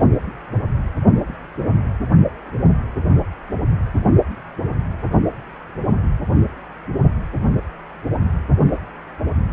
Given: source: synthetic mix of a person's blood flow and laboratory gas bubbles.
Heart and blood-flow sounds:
Doppler ultrasound of blood flow; precordium
no bubbles
From the record:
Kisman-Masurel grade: 000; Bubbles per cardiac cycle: 0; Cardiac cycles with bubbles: 0%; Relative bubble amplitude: no bubbles discernible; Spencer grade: 0 (complete lack of bubble signals)

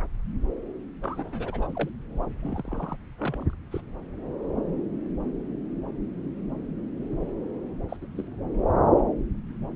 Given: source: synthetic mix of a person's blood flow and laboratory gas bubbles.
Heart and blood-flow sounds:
Doppler ultrasound of blood flow; subclavian vein
1.02-1.90 s: bubbles
2.43-2.97 s: bubbles
3.20-3.51 s: bubbles
3.72-3.81 s: bubbles
7.88-7.97 s: bubbles
8.01-8.06 s: bubbles
8.15-8.26 s: bubbles
From the record:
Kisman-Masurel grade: 221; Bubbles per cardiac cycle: several, 3 to 8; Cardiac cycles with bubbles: 10 to 50%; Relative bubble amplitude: barely perceptible (0.100 to 0.250); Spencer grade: 2 (many but less than half of the cardiac periods contain bubble signals, singularly or in groups); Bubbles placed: anywhere in the cardiac cycle

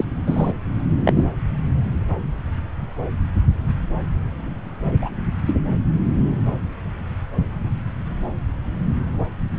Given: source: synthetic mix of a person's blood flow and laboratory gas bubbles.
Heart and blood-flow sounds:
Doppler ultrasound of blood flow; subclavian vein
0.00-0.05 s: bubbles
0.26-0.53 s: bubbles
1.05-1.12 s: bubbles
1.16-1.24 s: bubbles
5.02-5.10 s: bubbles
5.46-5.57 s: bubbles
From the record:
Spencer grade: 2 (many but less than half of the cardiac periods contain bubble signals, singularly or in groups); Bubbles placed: anywhere in the cardiac cycle

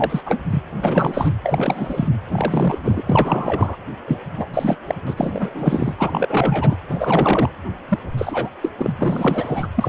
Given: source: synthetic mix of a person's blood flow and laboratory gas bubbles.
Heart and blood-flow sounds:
Doppler ultrasound of blood flow; precordium
0.00-0.21 s: bubbles
0.26-0.38 s: bubbles
0.50-0.62 s: bubbles
0.79-1.31 s: bubbles
1.44-2.08 s: bubbles
2.31-2.78 s: bubbles
2.83-3.02 s: bubbles
3.06-3.76 s: bubbles
4.08-4.17 s: bubbles
4.36-4.79 s: bubbles
4.87-4.95 s: bubbles
5.07-5.14 s: bubbles
5.17-5.96 s: bubbles
5.98-6.75 s: bubbles
6.88-7.49 s: bubbles
7.88-7.99 s: bubbles
8.18-8.49 s: bubbles
8.61-8.70 s: bubbles
8.77-8.92 s: bubbles
8.98-9.68 s: bubbles
9.75-9.89 s: bubbles
From the record:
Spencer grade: 3 (all of the cardiac periods contain showers or single bubble signals, but not dominating or overriding the cardiac motion signals); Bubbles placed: anywhere in the cardiac cycle

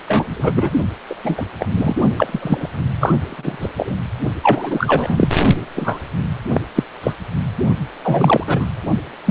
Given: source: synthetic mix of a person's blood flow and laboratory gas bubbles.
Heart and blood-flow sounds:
Doppler ultrasound of blood flow; precordium
0.06-0.70 s: bubbles
1.09-1.15 s: bubbles
1.24-1.45 s: bubbles
1.59-1.69 s: bubbles
1.77-1.96 s: bubbles
2.17-2.70 s: bubbles
3.00-3.16 s: bubbles
3.25-3.69 s: bubbles
3.77-3.95 s: bubbles
4.43-5.29 s: bubbles
5.75-5.99 s: bubbles
6.53-6.61 s: bubbles
6.75-6.84 s: bubbles
7.03-7.12 s: bubbles
8.03-8.44 s: bubbles
8.46-8.68 s: bubbles
9.26-9.31 s: bubbles
From the record:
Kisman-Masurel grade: 243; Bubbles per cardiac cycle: several, 3 to 8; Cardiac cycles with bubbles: 100%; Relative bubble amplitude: loud (0.450 to 0.775); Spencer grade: 3 (all of the cardiac periods contain showers or single bubble signals, but not dominating or overriding the cardiac motion signals); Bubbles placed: only in the low amplitude regions of the cardiac cycle

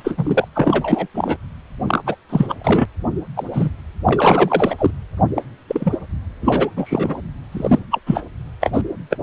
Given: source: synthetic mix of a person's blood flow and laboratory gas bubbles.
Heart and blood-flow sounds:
Doppler ultrasound of blood flow; precordium
0.00-0.48 s: bubbles
0.55-1.07 s: bubbles
1.14-1.37 s: bubbles
1.87-2.02 s: bubbles
2.06-2.15 s: bubbles
2.29-2.56 s: bubbles
2.59-2.85 s: bubbles
3.36-3.44 s: bubbles
3.50-3.71 s: bubbles
4.04-4.75 s: bubbles
4.78-4.91 s: bubbles
5.36-5.43 s: bubbles
5.67-5.97 s: bubbles
6.41-6.68 s: bubbles
6.76-7.20 s: bubbles
7.51-7.79 s: bubbles
7.90-7.99 s: bubbles
8.06-8.23 s: bubbles
8.61-8.71 s: bubbles
8.73-8.81 s: bubbles
9.10-9.17 s: bubbles
From the record:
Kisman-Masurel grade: 243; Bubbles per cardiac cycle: several, 3 to 8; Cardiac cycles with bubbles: 100%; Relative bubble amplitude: loud (0.450 to 0.775); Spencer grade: 3 (all of the cardiac periods contain showers or single bubble signals, but not dominating or overriding the cardiac motion signals); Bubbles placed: anywhere in the cardiac cycle

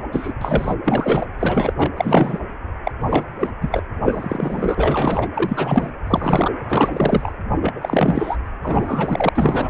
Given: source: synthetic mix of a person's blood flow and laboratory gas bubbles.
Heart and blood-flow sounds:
Doppler ultrasound of blood flow; precordium
0.00-0.03 s: bubbles
0.12-0.33 s: bubbles
0.41-0.75 s: bubbles
0.84-1.26 s: bubbles
1.39-1.73 s: bubbles
1.77-1.90 s: bubbles
1.97-2.39 s: bubbles
2.85-2.92 s: bubbles
3.01-3.24 s: bubbles
3.39-3.51 s: bubbles
3.61-3.82 s: bubbles
4.04-5.28 s: bubbles
5.33-5.92 s: bubbles
6.07-6.52 s: bubbles
6.68-7.33 s: bubbles
7.61-8.38 s: bubbles
8.62-9.29 s: bubbles
9.35-9.69 s: bubbles
From the record:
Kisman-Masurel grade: 343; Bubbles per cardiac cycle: rolling drumbeat, 9 or more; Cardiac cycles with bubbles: 100%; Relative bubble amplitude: loud (0.450 to 0.775); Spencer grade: 3 (all of the cardiac periods contain showers or single bubble signals, but not dominating or overriding the cardiac motion signals); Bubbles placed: anywhere in the cardiac cycle

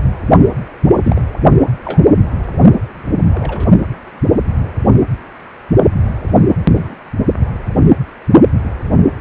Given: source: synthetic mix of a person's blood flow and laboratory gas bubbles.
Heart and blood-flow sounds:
Doppler ultrasound of blood flow; precordium
1.03-1.21 s: bubbles
1.85-2.02 s: bubbles
3.33-3.69 s: bubbles
6.73-6.96 s: bubbles
From the record:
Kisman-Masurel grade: 122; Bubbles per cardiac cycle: 1 to 2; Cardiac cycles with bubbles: 10 to 50%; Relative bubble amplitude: moderate (0.250 to 0.450); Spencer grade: 2 (many but less than half of the cardiac periods contain bubble signals, singularly or in groups); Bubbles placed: only in the low amplitude regions of the cardiac cycle

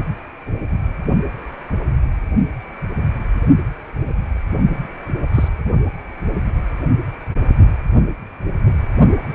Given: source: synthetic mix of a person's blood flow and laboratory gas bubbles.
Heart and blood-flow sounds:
Doppler ultrasound of blood flow; precordium
5.34-5.48 s: bubbles
From the record:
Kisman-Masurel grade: 122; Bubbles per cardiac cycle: 1 to 2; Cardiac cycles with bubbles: 10 to 50%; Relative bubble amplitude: moderate (0.250 to 0.450); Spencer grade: 2 (many but less than half of the cardiac periods contain bubble signals, singularly or in groups); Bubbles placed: only in the low amplitude regions of the cardiac cycle

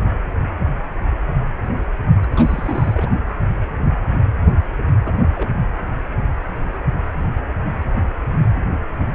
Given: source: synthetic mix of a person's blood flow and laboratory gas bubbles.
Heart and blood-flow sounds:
Doppler ultrasound of blood flow; precordium
2.24-2.27 s: bubbles
2.31-2.33 s: bubbles
2.36-3.09 s: bubbles
5.05-5.19 s: bubbles
5.35-5.55 s: bubbles
From the record:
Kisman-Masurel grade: 221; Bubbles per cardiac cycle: several, 3 to 8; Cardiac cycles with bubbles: 10 to 50%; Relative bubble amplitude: barely perceptible (0.100 to 0.250); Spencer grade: 2 (many but less than half of the cardiac periods contain bubble signals, singularly or in groups); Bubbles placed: anywhere in the cardiac cycle

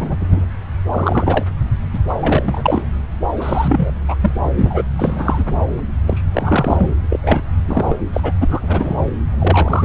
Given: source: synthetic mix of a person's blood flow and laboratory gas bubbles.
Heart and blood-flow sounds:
Doppler ultrasound of blood flow; subclavian vein
0.00-0.17 s: bubbles
0.20-0.45 s: bubbles
0.91-1.45 s: bubbles
1.92-1.98 s: bubbles
2.08-2.15 s: bubbles
2.21-2.85 s: bubbles
3.35-3.90 s: bubbles
4.08-4.16 s: bubbles
4.21-4.31 s: bubbles
4.56-4.83 s: bubbles
4.96-5.44 s: bubbles
6.07-6.22 s: bubbles
6.33-6.94 s: bubbles
7.10-7.20 s: bubbles
7.23-7.43 s: bubbles
7.68-7.96 s: bubbles
8.13-8.32 s: bubbles
8.41-9.06 s: bubbles
9.39-9.85 s: bubbles
From the record:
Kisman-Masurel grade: 243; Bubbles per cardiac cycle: several, 3 to 8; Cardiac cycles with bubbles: 100%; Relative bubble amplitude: loud (0.450 to 0.775); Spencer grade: 3 (all of the cardiac periods contain showers or single bubble signals, but not dominating or overriding the cardiac motion signals); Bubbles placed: anywhere in the cardiac cycle

